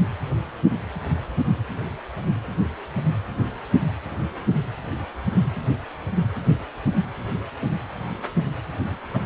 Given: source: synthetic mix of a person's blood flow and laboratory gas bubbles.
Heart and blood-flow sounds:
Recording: Doppler ultrasound of blood flow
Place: precordium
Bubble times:
9.13-9.19 s: bubbles
From the record:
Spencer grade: 2 (many but less than half of the cardiac periods contain bubble signals, singularly or in groups)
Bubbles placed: anywhere in the cardiac cycle

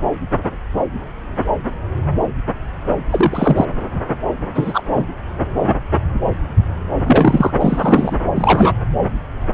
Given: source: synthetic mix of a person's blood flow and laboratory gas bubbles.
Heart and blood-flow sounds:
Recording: Doppler ultrasound of blood flow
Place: subclavian vein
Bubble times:
3.10-3.65 s: bubbles
4.54-4.83 s: bubbles
4.93-5.05 s: bubbles
7.04-7.51 s: bubbles
7.59-8.17 s: bubbles
8.36-8.74 s: bubbles
From the record:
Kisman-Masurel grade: 223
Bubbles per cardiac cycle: several, 3 to 8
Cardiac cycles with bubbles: 10 to 50%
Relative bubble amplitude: loud (0.450 to 0.775)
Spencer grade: 2 (many but less than half of the cardiac periods contain bubble signals, singularly or in groups)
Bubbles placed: anywhere in the cardiac cycle

